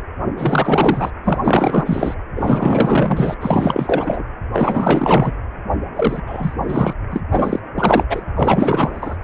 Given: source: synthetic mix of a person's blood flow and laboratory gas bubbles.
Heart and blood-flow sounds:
Doppler ultrasound of blood flow; precordium
0.36-1.10 s: bubbles
1.23-2.14 s: bubbles
2.35-3.34 s: bubbles
3.41-4.23 s: bubbles
4.53-5.33 s: bubbles
5.96-6.21 s: bubbles
6.26-6.54 s: bubbles
6.62-6.94 s: bubbles
7.11-7.23 s: bubbles
7.31-7.62 s: bubbles
7.75-8.03 s: bubbles
8.09-8.24 s: bubbles
8.35-9.17 s: bubbles
From the record:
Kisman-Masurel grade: 444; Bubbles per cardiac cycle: continuous sound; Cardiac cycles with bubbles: 100%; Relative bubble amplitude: maximal (0.775 to 0.999); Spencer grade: 4 (maximum detectable bubble signal sounding continuously throughout systole and diastole of every cardiac period, and overriding the amplitude of the normal cardiac signals); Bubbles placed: anywhere in the cardiac cycle

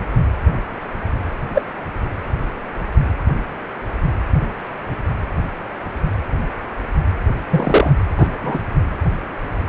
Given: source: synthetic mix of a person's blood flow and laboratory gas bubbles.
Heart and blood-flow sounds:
Doppler ultrasound of blood flow; precordium
1.55-1.62 s: bubbles
7.50-7.92 s: bubbles
8.18-8.29 s: bubbles
8.41-8.58 s: bubbles
From the record:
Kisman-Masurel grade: 123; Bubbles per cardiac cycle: 1 to 2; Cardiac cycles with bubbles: 10 to 50%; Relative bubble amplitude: loud (0.450 to 0.775); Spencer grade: 2 (many but less than half of the cardiac periods contain bubble signals, singularly or in groups); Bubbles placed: anywhere in the cardiac cycle

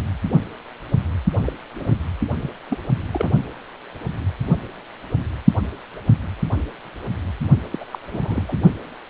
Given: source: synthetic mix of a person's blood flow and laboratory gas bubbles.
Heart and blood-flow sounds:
Doppler ultrasound of blood flow; precordium
1.38-1.53 s: bubbles
1.76-1.97 s: bubbles
2.41-2.50 s: bubbles
2.70-2.79 s: bubbles
3.13-3.29 s: bubbles
7.71-7.86 s: bubbles
7.91-7.98 s: bubbles
8.12-8.20 s: bubbles
8.23-8.57 s: bubbles
From the record:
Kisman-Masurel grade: 221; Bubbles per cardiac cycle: several, 3 to 8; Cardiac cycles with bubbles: 10 to 50%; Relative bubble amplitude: barely perceptible (0.100 to 0.250); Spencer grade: 2 (many but less than half of the cardiac periods contain bubble signals, singularly or in groups); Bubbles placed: only in the low amplitude regions of the cardiac cycle

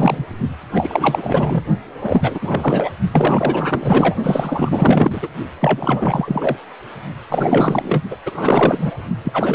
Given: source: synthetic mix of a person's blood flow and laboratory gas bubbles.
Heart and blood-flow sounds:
Doppler ultrasound of blood flow; precordium
0.00-0.26 s: bubbles
0.73-1.64 s: bubbles
2.01-2.92 s: bubbles
3.12-4.16 s: bubbles
4.23-5.31 s: bubbles
5.59-6.57 s: bubbles
7.30-8.02 s: bubbles
8.11-8.16 s: bubbles
8.26-8.92 s: bubbles
9.24-9.55 s: bubbles
From the record:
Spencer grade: 4 (maximum detectable bubble signal sounding continuously throughout systole and diastole of every cardiac period, and overriding the amplitude of the normal cardiac signals); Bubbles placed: only in the low amplitude regions of the cardiac cycle

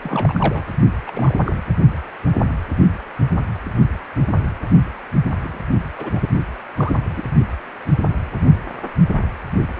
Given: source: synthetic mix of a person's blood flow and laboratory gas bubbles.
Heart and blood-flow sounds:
Doppler ultrasound of blood flow; precordium
0.01-0.65 s: bubbles
1.06-1.11 s: bubbles
1.14-1.35 s: bubbles
1.45-1.61 s: bubbles
5.39-5.58 s: bubbles
5.98-6.21 s: bubbles
6.76-6.97 s: bubbles
7.17-7.23 s: bubbles
From the record:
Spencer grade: 2 (many but less than half of the cardiac periods contain bubble signals, singularly or in groups); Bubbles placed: only in the low amplitude regions of the cardiac cycle

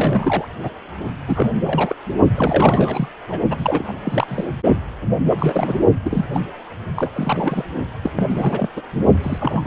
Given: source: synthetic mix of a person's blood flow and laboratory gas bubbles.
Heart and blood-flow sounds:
Doppler ultrasound of blood flow; precordium
0.00-0.46 s: bubbles
0.62-0.70 s: bubbles
1.27-1.52 s: bubbles
1.60-1.96 s: bubbles
2.35-3.09 s: bubbles
3.28-3.40 s: bubbles
3.50-3.99 s: bubbles
4.04-4.44 s: bubbles
5.30-5.36 s: bubbles
5.38-5.77 s: bubbles
6.04-6.25 s: bubbles
6.33-6.41 s: bubbles
6.96-7.63 s: bubbles
8.03-8.10 s: bubbles
8.15-8.24 s: bubbles
8.29-8.68 s: bubbles
8.76-8.82 s: bubbles
9.23-9.67 s: bubbles
From the record:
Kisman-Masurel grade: 342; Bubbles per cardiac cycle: rolling drumbeat, 9 or more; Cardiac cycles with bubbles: 100%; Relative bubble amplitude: moderate (0.250 to 0.450); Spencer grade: 3 (all of the cardiac periods contain showers or single bubble signals, but not dominating or overriding the cardiac motion signals); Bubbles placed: only in the low amplitude regions of the cardiac cycle

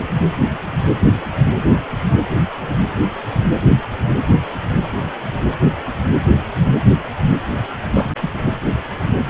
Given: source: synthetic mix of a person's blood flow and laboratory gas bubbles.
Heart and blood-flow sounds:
Doppler ultrasound of blood flow; precordium
0.00-0.05 s: bubbles
7.94-8.13 s: bubbles
8.21-8.31 s: bubbles
From the record:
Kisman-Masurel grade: 222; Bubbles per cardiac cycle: several, 3 to 8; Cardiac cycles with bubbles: 10 to 50%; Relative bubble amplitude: moderate (0.250 to 0.450); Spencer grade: 2 (many but less than half of the cardiac periods contain bubble signals, singularly or in groups); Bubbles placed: anywhere in the cardiac cycle

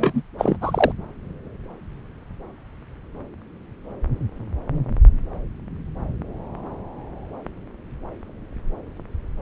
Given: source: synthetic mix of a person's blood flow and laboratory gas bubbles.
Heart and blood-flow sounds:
Doppler ultrasound of blood flow; subclavian vein
0.00-0.23 s: bubbles
0.38-0.57 s: bubbles
0.61-0.92 s: bubbles
From the record:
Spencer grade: 1 (occasional bubble signal discernible with the cardiac motion signal, with majority of cardiac periods free of bubbles); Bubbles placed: anywhere in the cardiac cycle

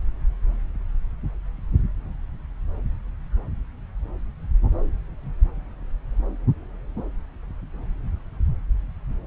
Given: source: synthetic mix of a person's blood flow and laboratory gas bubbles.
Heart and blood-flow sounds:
Doppler ultrasound of blood flow; subclavian vein
no bubbles
From the record:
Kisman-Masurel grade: 000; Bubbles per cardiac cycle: 0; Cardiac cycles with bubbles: 0%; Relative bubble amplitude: no bubbles discernible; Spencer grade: 0 (complete lack of bubble signals)

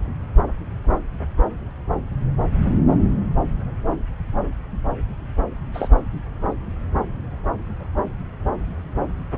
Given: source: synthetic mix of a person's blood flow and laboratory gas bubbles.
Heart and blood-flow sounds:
Doppler ultrasound of blood flow; subclavian vein
5.73-5.88 s: bubbles
From the record:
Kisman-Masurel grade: 112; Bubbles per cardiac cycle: 1 to 2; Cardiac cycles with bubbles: 1 to 10%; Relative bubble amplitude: moderate (0.250 to 0.450); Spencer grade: 1 (occasional bubble signal discernible with the cardiac motion signal, with majority of cardiac periods free of bubbles); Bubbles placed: anywhere in the cardiac cycle

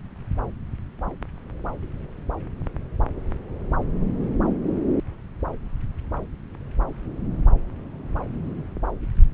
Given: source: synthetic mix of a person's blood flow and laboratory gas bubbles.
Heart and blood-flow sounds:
Doppler ultrasound of blood flow; subclavian vein
no bubbles
From the record:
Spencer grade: 0 (complete lack of bubble signals)

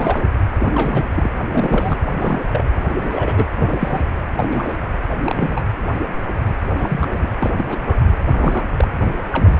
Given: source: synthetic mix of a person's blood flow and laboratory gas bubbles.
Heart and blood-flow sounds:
Doppler ultrasound of blood flow; precordium
0.00-0.28 s: bubbles
0.59-1.06 s: bubbles
1.08-1.31 s: bubbles
1.51-1.98 s: bubbles
2.19-2.41 s: bubbles
2.50-2.65 s: bubbles
2.89-2.95 s: bubbles
2.99-3.46 s: bubbles
3.54-4.02 s: bubbles
4.38-4.77 s: bubbles
5.23-5.64 s: bubbles
5.99-6.08 s: bubbles
6.79-7.08 s: bubbles
7.13-7.27 s: bubbles
7.40-7.52 s: bubbles
7.57-7.97 s: bubbles
8.30-8.64 s: bubbles
8.77-8.91 s: bubbles
9.00-9.11 s: bubbles
9.33-9.58 s: bubbles
From the record:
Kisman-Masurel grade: 242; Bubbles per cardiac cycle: several, 3 to 8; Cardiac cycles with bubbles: 100%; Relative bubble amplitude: moderate (0.250 to 0.450); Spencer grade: 3 (all of the cardiac periods contain showers or single bubble signals, but not dominating or overriding the cardiac motion signals); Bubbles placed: anywhere in the cardiac cycle

